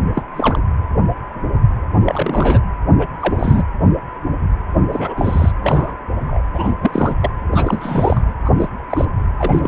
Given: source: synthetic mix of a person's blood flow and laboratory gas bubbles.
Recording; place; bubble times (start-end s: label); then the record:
Doppler ultrasound of blood flow; precordium
0.13-0.23 s: bubbles
0.35-0.59 s: bubbles
2.05-2.60 s: bubbles
2.98-3.07 s: bubbles
3.20-3.65 s: bubbles
4.92-5.53 s: bubbles
5.62-5.95 s: bubbles
6.27-6.42 s: bubbles
6.53-6.73 s: bubbles
6.80-7.15 s: bubbles
7.21-7.32 s: bubbles
7.51-8.21 s: bubbles
8.44-8.51 s: bubbles
8.56-8.69 s: bubbles
8.89-9.05 s: bubbles
9.38-9.68 s: bubbles
From the record:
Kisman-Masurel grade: 232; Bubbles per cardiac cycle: several, 3 to 8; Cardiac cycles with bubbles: 50 to 99%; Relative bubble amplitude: moderate (0.250 to 0.450); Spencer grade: 3 (all of the cardiac periods contain showers or single bubble signals, but not dominating or overriding the cardiac motion signals); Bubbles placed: anywhere in the cardiac cycle